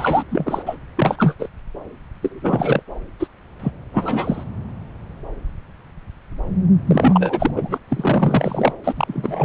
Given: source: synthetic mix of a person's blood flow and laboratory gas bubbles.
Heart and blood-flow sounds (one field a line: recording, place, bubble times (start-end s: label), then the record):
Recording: Doppler ultrasound of blood flow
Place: subclavian vein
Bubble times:
0.00-0.24 s: bubbles
0.30-0.62 s: bubbles
0.66-0.77 s: bubbles
0.97-1.35 s: bubbles
1.39-1.49 s: bubbles
2.21-2.83 s: bubbles
3.19-3.27 s: bubbles
3.59-3.71 s: bubbles
3.92-4.43 s: bubbles
6.87-7.51 s: bubbles
7.55-7.78 s: bubbles
7.89-8.73 s: bubbles
8.84-9.45 s: bubbles
From the record:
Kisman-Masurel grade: 333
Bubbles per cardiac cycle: rolling drumbeat, 9 or more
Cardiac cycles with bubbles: 50 to 99%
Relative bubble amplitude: loud (0.450 to 0.775)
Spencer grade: 3 (all of the cardiac periods contain showers or single bubble signals, but not dominating or overriding the cardiac motion signals)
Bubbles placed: anywhere in the cardiac cycle